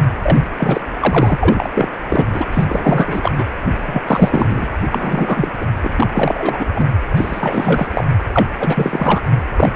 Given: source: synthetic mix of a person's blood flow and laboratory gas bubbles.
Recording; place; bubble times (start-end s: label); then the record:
Doppler ultrasound of blood flow; precordium
0.22-0.47 s: bubbles
0.57-0.82 s: bubbles
1.00-1.69 s: bubbles
1.73-1.89 s: bubbles
2.08-2.26 s: bubbles
2.33-2.49 s: bubbles
2.52-3.32 s: bubbles
3.38-3.45 s: bubbles
3.86-4.01 s: bubbles
4.06-4.67 s: bubbles
4.91-5.51 s: bubbles
5.60-5.65 s: bubbles
5.83-5.94 s: bubbles
5.97-6.07 s: bubbles
6.14-6.66 s: bubbles
6.75-6.87 s: bubbles
7.15-7.88 s: bubbles
7.92-8.04 s: bubbles
8.32-8.45 s: bubbles
8.60-9.21 s: bubbles
9.57-9.72 s: bubbles
From the record:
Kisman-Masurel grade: 333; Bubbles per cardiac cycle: rolling drumbeat, 9 or more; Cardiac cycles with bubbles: 50 to 99%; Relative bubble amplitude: loud (0.450 to 0.775); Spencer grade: 3 (all of the cardiac periods contain showers or single bubble signals, but not dominating or overriding the cardiac motion signals); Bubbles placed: anywhere in the cardiac cycle